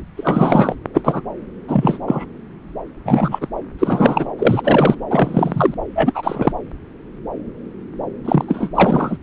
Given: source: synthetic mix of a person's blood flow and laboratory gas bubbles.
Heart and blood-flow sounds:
Doppler ultrasound of blood flow; subclavian vein
0.16-0.75 s: bubbles
0.94-1.02 s: bubbles
1.04-1.21 s: bubbles
1.67-1.99 s: bubbles
2.07-2.25 s: bubbles
3.05-3.47 s: bubbles
3.79-4.29 s: bubbles
4.38-4.95 s: bubbles
5.10-5.75 s: bubbles
5.96-6.53 s: bubbles
8.24-8.44 s: bubbles
8.48-8.69 s: bubbles
8.75-9.17 s: bubbles
From the record:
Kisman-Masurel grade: 233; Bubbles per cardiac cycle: several, 3 to 8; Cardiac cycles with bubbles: 50 to 99%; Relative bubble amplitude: loud (0.450 to 0.775); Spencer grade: 3 (all of the cardiac periods contain showers or single bubble signals, but not dominating or overriding the cardiac motion signals); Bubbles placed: anywhere in the cardiac cycle

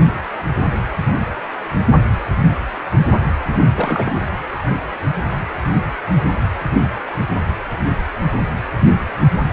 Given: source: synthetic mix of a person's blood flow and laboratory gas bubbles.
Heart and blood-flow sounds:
Doppler ultrasound of blood flow; precordium
3.76-4.20 s: bubbles
From the record:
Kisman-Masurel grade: 212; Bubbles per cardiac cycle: several, 3 to 8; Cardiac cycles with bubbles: 1 to 10%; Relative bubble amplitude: moderate (0.250 to 0.450); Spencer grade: 1 (occasional bubble signal discernible with the cardiac motion signal, with majority of cardiac periods free of bubbles); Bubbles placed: anywhere in the cardiac cycle

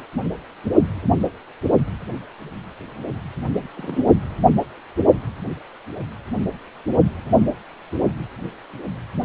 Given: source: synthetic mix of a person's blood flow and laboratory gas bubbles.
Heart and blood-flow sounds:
Doppler ultrasound of blood flow; precordium
3.77-4.04 s: bubbles
From the record:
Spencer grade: 1 (occasional bubble signal discernible with the cardiac motion signal, with majority of cardiac periods free of bubbles); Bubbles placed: anywhere in the cardiac cycle

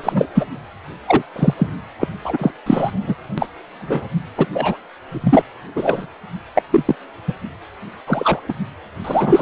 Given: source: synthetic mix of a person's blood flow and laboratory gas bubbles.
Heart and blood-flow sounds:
Doppler ultrasound of blood flow; precordium
0.00-0.27 s: bubbles
0.35-0.45 s: bubbles
1.07-1.22 s: bubbles
1.35-1.54 s: bubbles
1.58-1.67 s: bubbles
1.99-2.08 s: bubbles
2.24-2.51 s: bubbles
2.66-3.15 s: bubbles
3.38-3.46 s: bubbles
3.79-4.07 s: bubbles
4.37-4.46 s: bubbles
4.54-4.77 s: bubbles
5.08-5.42 s: bubbles
5.75-6.07 s: bubbles
6.55-6.62 s: bubbles
6.71-6.96 s: bubbles
7.28-7.33 s: bubbles
8.07-8.54 s: bubbles
9.04-9.42 s: bubbles
From the record:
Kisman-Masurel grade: 243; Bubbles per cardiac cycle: several, 3 to 8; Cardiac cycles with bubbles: 100%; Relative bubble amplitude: loud (0.450 to 0.775); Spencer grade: 3 (all of the cardiac periods contain showers or single bubble signals, but not dominating or overriding the cardiac motion signals); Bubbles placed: anywhere in the cardiac cycle

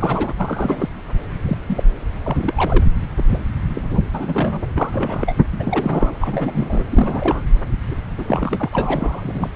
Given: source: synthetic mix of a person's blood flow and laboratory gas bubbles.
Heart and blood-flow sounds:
Doppler ultrasound of blood flow; subclavian vein
0.00-0.34 s: bubbles
0.38-0.89 s: bubbles
1.42-1.57 s: bubbles
1.66-1.83 s: bubbles
2.26-2.85 s: bubbles
3.17-3.23 s: bubbles
3.29-3.39 s: bubbles
3.69-3.82 s: bubbles
3.89-4.01 s: bubbles
4.13-4.62 s: bubbles
4.76-5.36 s: bubbles
5.53-6.18 s: bubbles
6.20-6.83 s: bubbles
6.92-7.46 s: bubbles
7.91-7.96 s: bubbles
8.18-9.49 s: bubbles
From the record:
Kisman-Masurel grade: 242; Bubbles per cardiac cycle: several, 3 to 8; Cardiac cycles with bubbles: 100%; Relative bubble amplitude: moderate (0.250 to 0.450); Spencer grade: 3 (all of the cardiac periods contain showers or single bubble signals, but not dominating or overriding the cardiac motion signals); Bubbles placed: anywhere in the cardiac cycle

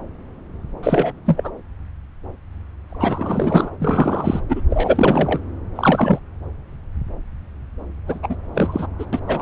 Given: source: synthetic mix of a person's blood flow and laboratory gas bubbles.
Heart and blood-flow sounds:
Doppler ultrasound of blood flow; subclavian vein
0.82-1.12 s: bubbles
1.25-1.51 s: bubbles
2.88-3.71 s: bubbles
3.79-4.41 s: bubbles
4.48-4.62 s: bubbles
4.69-5.40 s: bubbles
5.75-6.19 s: bubbles
8.07-8.20 s: bubbles
8.22-8.36 s: bubbles
8.54-8.87 s: bubbles
8.98-9.05 s: bubbles
9.12-9.20 s: bubbles
9.27-9.42 s: bubbles
From the record:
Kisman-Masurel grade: 333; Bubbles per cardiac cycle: rolling drumbeat, 9 or more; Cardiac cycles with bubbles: 50 to 99%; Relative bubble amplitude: loud (0.450 to 0.775); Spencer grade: 3 (all of the cardiac periods contain showers or single bubble signals, but not dominating or overriding the cardiac motion signals); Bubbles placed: anywhere in the cardiac cycle

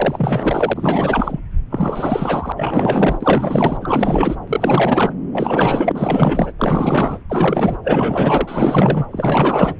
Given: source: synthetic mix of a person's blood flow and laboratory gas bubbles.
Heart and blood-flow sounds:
Doppler ultrasound of blood flow; subclavian vein
0.00-1.40 s: bubbles
1.71-2.52 s: bubbles
2.56-3.77 s: bubbles
3.81-4.36 s: bubbles
4.47-5.12 s: bubbles
5.32-6.52 s: bubbles
6.58-7.18 s: bubbles
7.29-7.78 s: bubbles
7.83-9.06 s: bubbles
9.11-9.75 s: bubbles
From the record:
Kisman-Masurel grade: 444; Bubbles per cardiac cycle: continuous sound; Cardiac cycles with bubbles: 100%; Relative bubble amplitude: maximal (0.775 to 0.999); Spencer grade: 4 (maximum detectable bubble signal sounding continuously throughout systole and diastole of every cardiac period, and overriding the amplitude of the normal cardiac signals); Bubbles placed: anywhere in the cardiac cycle

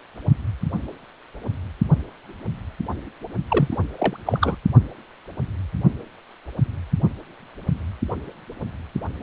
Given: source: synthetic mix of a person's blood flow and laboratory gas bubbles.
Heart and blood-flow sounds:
Doppler ultrasound of blood flow; precordium
3.50-3.77 s: bubbles
3.98-4.17 s: bubbles
4.26-4.56 s: bubbles
From the record:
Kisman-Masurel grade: 222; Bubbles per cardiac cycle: several, 3 to 8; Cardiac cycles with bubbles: 10 to 50%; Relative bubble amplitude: moderate (0.250 to 0.450); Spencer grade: 2 (many but less than half of the cardiac periods contain bubble signals, singularly or in groups); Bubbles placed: only in the low amplitude regions of the cardiac cycle

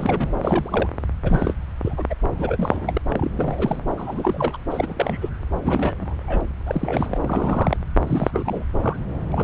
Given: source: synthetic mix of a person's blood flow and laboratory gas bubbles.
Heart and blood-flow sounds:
Doppler ultrasound of blood flow; subclavian vein
0.00-0.28 s: bubbles
0.36-0.89 s: bubbles
1.24-1.54 s: bubbles
1.85-2.05 s: bubbles
2.10-2.15 s: bubbles
2.22-3.02 s: bubbles
3.10-3.29 s: bubbles
3.36-3.81 s: bubbles
3.97-4.56 s: bubbles
4.71-5.29 s: bubbles
5.60-6.41 s: bubbles
6.66-7.18 s: bubbles
7.21-7.77 s: bubbles
8.06-8.65 s: bubbles
8.81-8.99 s: bubbles
9.31-9.44 s: bubbles
From the record:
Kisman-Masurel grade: 342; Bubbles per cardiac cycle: rolling drumbeat, 9 or more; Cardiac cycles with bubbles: 100%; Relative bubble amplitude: moderate (0.250 to 0.450); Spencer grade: 3 (all of the cardiac periods contain showers or single bubble signals, but not dominating or overriding the cardiac motion signals); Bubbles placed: anywhere in the cardiac cycle

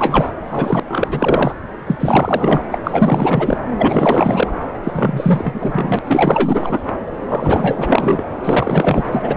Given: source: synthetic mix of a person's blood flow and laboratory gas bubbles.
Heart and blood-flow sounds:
Doppler ultrasound of blood flow; subclavian vein
0.00-0.33 s: bubbles
0.49-0.80 s: bubbles
0.88-1.54 s: bubbles
1.86-2.62 s: bubbles
2.70-2.77 s: bubbles
2.83-3.57 s: bubbles
3.77-4.53 s: bubbles
4.83-5.99 s: bubbles
6.05-6.79 s: bubbles
7.28-8.24 s: bubbles
8.44-9.37 s: bubbles
From the record:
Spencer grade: 4 (maximum detectable bubble signal sounding continuously throughout systole and diastole of every cardiac period, and overriding the amplitude of the normal cardiac signals); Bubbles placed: anywhere in the cardiac cycle

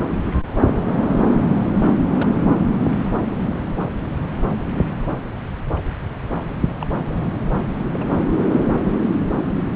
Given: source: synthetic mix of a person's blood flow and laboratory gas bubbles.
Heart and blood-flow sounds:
Doppler ultrasound of blood flow; subclavian vein
2.05-2.49 s: bubbles
6.82-6.86 s: bubbles
6.93-7.04 s: bubbles
7.94-8.05 s: bubbles
From the record:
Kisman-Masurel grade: 121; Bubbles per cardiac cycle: 1 to 2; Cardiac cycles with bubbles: 10 to 50%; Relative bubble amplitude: barely perceptible (0.100 to 0.250); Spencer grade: 2 (many but less than half of the cardiac periods contain bubble signals, singularly or in groups); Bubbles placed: anywhere in the cardiac cycle

